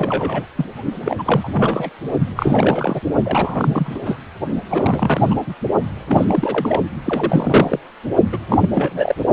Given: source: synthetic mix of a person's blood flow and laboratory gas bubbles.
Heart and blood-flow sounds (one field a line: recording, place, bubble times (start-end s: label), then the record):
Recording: Doppler ultrasound of blood flow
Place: precordium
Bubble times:
0.00-0.45 s: bubbles
0.55-0.66 s: bubbles
1.05-1.16 s: bubbles
1.19-1.23 s: bubbles
1.25-1.48 s: bubbles
1.53-1.90 s: bubbles
2.35-3.00 s: bubbles
3.23-3.99 s: bubbles
4.05-4.18 s: bubbles
4.54-4.61 s: bubbles
4.70-5.35 s: bubbles
5.47-5.54 s: bubbles
6.09-6.81 s: bubbles
7.05-7.79 s: bubbles
8.32-8.38 s: bubbles
8.50-8.58 s: bubbles
8.60-8.69 s: bubbles
8.74-9.15 s: bubbles
From the record:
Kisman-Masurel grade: 342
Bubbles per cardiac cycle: rolling drumbeat, 9 or more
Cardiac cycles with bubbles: 100%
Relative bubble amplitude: moderate (0.250 to 0.450)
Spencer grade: 3 (all of the cardiac periods contain showers or single bubble signals, but not dominating or overriding the cardiac motion signals)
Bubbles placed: only in the low amplitude regions of the cardiac cycle